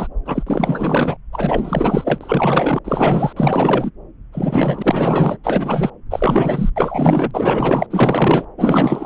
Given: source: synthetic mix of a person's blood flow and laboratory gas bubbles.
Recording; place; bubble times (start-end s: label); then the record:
Doppler ultrasound of blood flow; subclavian vein
0.00-0.08 s: bubbles
0.25-0.43 s: bubbles
0.47-1.17 s: bubbles
1.32-2.79 s: bubbles
2.85-3.33 s: bubbles
3.36-3.91 s: bubbles
4.33-5.37 s: bubbles
5.43-5.90 s: bubbles
6.10-6.70 s: bubbles
6.76-7.86 s: bubbles
7.91-8.45 s: bubbles
8.57-9.06 s: bubbles
From the record:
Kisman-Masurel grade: 444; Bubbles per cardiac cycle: continuous sound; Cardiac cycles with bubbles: 100%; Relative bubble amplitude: maximal (0.775 to 0.999); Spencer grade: 4 (maximum detectable bubble signal sounding continuously throughout systole and diastole of every cardiac period, and overriding the amplitude of the normal cardiac signals); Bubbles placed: anywhere in the cardiac cycle